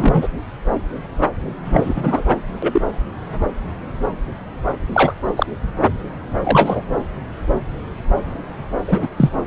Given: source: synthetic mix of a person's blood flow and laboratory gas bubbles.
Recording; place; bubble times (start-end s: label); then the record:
Doppler ultrasound of blood flow; subclavian vein
0.00-0.28 s: bubbles
1.64-2.21 s: bubbles
2.62-2.81 s: bubbles
4.92-5.14 s: bubbles
5.37-5.46 s: bubbles
6.43-6.83 s: bubbles
8.88-9.08 s: bubbles
9.17-9.31 s: bubbles
From the record:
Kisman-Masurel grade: 223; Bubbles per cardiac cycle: several, 3 to 8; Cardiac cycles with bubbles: 10 to 50%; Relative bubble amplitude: loud (0.450 to 0.775); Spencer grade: 2 (many but less than half of the cardiac periods contain bubble signals, singularly or in groups); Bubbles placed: anywhere in the cardiac cycle